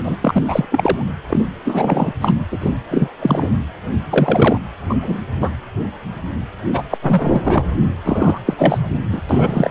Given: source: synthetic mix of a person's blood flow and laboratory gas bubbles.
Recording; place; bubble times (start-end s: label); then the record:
Doppler ultrasound of blood flow; precordium
0.00-0.17 s: bubbles
0.21-0.43 s: bubbles
0.48-0.66 s: bubbles
0.71-1.06 s: bubbles
1.29-1.45 s: bubbles
1.64-2.12 s: bubbles
2.21-2.32 s: bubbles
2.52-2.58 s: bubbles
2.60-2.72 s: bubbles
2.91-3.09 s: bubbles
3.22-3.50 s: bubbles
4.10-4.58 s: bubbles
4.89-4.98 s: bubbles
5.02-5.18 s: bubbles
5.40-5.50 s: bubbles
6.72-6.83 s: bubbles
6.90-6.97 s: bubbles
7.02-7.65 s: bubbles
8.04-8.38 s: bubbles
8.46-8.83 s: bubbles
9.12-9.21 s: bubbles
9.29-9.71 s: bubbles
From the record:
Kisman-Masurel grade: 333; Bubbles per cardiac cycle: rolling drumbeat, 9 or more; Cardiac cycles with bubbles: 50 to 99%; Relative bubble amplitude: loud (0.450 to 0.775); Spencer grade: 3 (all of the cardiac periods contain showers or single bubble signals, but not dominating or overriding the cardiac motion signals); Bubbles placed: anywhere in the cardiac cycle